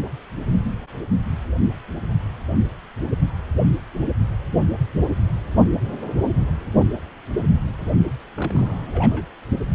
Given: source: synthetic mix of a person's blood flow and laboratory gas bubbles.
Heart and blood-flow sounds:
Doppler ultrasound of blood flow; precordium
8.36-9.25 s: bubbles
From the record:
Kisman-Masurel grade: 211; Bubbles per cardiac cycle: several, 3 to 8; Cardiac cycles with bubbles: 1 to 10%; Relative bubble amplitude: barely perceptible (0.100 to 0.250); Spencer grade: 1 (occasional bubble signal discernible with the cardiac motion signal, with majority of cardiac periods free of bubbles); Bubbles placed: only in the low amplitude regions of the cardiac cycle

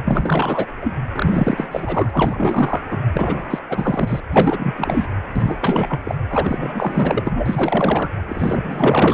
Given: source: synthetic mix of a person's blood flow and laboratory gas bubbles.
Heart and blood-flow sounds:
Doppler ultrasound of blood flow; precordium
0.05-0.66 s: bubbles
0.80-0.93 s: bubbles
1.12-1.68 s: bubbles
1.71-2.81 s: bubbles
2.91-2.98 s: bubbles
3.12-3.59 s: bubbles
3.69-4.20 s: bubbles
4.32-5.07 s: bubbles
5.35-6.01 s: bubbles
6.04-6.15 s: bubbles
6.30-8.08 s: bubbles
8.28-9.14 s: bubbles
From the record:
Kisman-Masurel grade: 444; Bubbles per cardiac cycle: continuous sound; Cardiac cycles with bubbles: 100%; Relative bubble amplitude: maximal (0.775 to 0.999); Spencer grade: 4 (maximum detectable bubble signal sounding continuously throughout systole and diastole of every cardiac period, and overriding the amplitude of the normal cardiac signals); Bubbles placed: anywhere in the cardiac cycle

